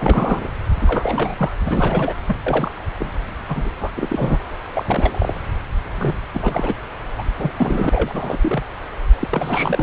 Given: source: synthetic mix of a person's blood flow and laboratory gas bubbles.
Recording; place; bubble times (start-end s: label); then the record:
Doppler ultrasound of blood flow; subclavian vein
0.00-0.51 s: bubbles
0.81-1.54 s: bubbles
1.65-2.19 s: bubbles
2.27-2.38 s: bubbles
2.46-2.71 s: bubbles
2.99-3.12 s: bubbles
3.49-3.70 s: bubbles
3.79-3.92 s: bubbles
3.96-4.38 s: bubbles
4.75-5.41 s: bubbles
5.98-6.16 s: bubbles
6.34-6.75 s: bubbles
7.17-7.24 s: bubbles
7.37-7.51 s: bubbles
7.58-7.90 s: bubbles
7.92-8.65 s: bubbles
9.21-9.28 s: bubbles
9.30-9.83 s: bubbles
From the record:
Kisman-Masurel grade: 342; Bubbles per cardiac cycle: rolling drumbeat, 9 or more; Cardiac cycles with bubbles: 100%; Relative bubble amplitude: moderate (0.250 to 0.450); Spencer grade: 3 (all of the cardiac periods contain showers or single bubble signals, but not dominating or overriding the cardiac motion signals); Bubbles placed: anywhere in the cardiac cycle